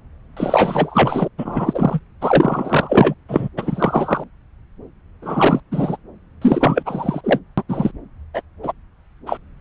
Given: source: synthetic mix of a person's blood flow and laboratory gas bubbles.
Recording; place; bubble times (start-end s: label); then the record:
Doppler ultrasound of blood flow; subclavian vein
0.36-1.28 s: bubbles
1.38-2.00 s: bubbles
2.21-3.15 s: bubbles
3.29-3.48 s: bubbles
3.57-4.24 s: bubbles
5.21-5.60 s: bubbles
5.71-5.97 s: bubbles
6.42-6.83 s: bubbles
6.85-7.21 s: bubbles
7.24-7.40 s: bubbles
7.58-7.62 s: bubbles
7.68-7.92 s: bubbles
8.33-8.41 s: bubbles
8.62-8.72 s: bubbles
9.26-9.38 s: bubbles
From the record:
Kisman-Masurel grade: 233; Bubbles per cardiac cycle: several, 3 to 8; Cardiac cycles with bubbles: 50 to 99%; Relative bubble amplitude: loud (0.450 to 0.775); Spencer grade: 3 (all of the cardiac periods contain showers or single bubble signals, but not dominating or overriding the cardiac motion signals); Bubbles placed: anywhere in the cardiac cycle